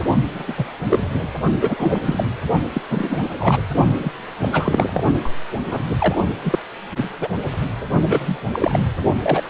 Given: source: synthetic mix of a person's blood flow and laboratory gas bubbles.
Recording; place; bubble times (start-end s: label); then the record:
Doppler ultrasound of blood flow; precordium
0.27-0.53 s: bubbles
0.56-0.66 s: bubbles
0.89-1.08 s: bubbles
1.15-1.29 s: bubbles
1.61-1.99 s: bubbles
2.04-2.24 s: bubbles
2.74-2.81 s: bubbles
2.90-3.28 s: bubbles
3.39-3.62 s: bubbles
3.98-4.12 s: bubbles
4.41-4.48 s: bubbles
4.52-5.04 s: bubbles
5.23-5.30 s: bubbles
5.66-5.82 s: bubbles
5.89-6.15 s: bubbles
6.42-6.59 s: bubbles
6.97-7.09 s: bubbles
7.21-7.28 s: bubbles
7.90-8.37 s: bubbles
8.52-8.79 s: bubbles
9.22-9.43 s: bubbles
From the record:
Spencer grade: 3 (all of the cardiac periods contain showers or single bubble signals, but not dominating or overriding the cardiac motion signals); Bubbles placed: only in the low amplitude regions of the cardiac cycle